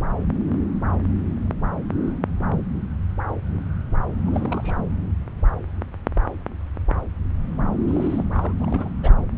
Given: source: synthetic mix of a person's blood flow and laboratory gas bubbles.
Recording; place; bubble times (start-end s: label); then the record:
Doppler ultrasound of blood flow; subclavian vein
4.27-4.79 s: bubbles
7.88-8.24 s: bubbles
8.34-8.53 s: bubbles
8.60-8.89 s: bubbles
9.02-9.14 s: bubbles
From the record:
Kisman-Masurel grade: 221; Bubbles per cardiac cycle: several, 3 to 8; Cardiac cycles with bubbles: 10 to 50%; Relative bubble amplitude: barely perceptible (0.100 to 0.250); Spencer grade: 2 (many but less than half of the cardiac periods contain bubble signals, singularly or in groups); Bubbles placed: anywhere in the cardiac cycle